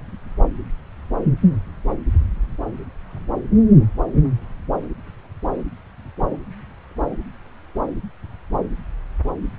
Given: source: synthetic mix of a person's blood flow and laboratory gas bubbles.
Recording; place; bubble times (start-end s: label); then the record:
Doppler ultrasound of blood flow; subclavian vein
no bubbles
From the record:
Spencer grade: 0 (complete lack of bubble signals)